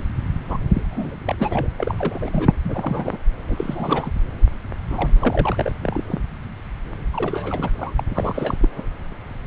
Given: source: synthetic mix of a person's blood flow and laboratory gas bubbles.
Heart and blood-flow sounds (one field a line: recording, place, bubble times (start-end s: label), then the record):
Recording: Doppler ultrasound of blood flow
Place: subclavian vein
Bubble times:
0.49-0.57 s: bubbles
0.74-1.16 s: bubbles
1.25-1.35 s: bubbles
1.39-1.68 s: bubbles
1.78-1.93 s: bubbles
1.98-2.52 s: bubbles
2.64-3.17 s: bubbles
3.48-4.11 s: bubbles
4.90-5.11 s: bubbles
5.21-5.72 s: bubbles
5.82-6.04 s: bubbles
6.08-6.20 s: bubbles
7.13-7.70 s: bubbles
7.78-7.93 s: bubbles
7.97-8.03 s: bubbles
8.08-8.54 s: bubbles
8.60-8.68 s: bubbles
8.76-8.82 s: bubbles
From the record:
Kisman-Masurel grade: 332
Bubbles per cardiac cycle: rolling drumbeat, 9 or more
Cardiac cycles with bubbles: 50 to 99%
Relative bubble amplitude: moderate (0.250 to 0.450)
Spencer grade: 3 (all of the cardiac periods contain showers or single bubble signals, but not dominating or overriding the cardiac motion signals)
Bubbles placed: anywhere in the cardiac cycle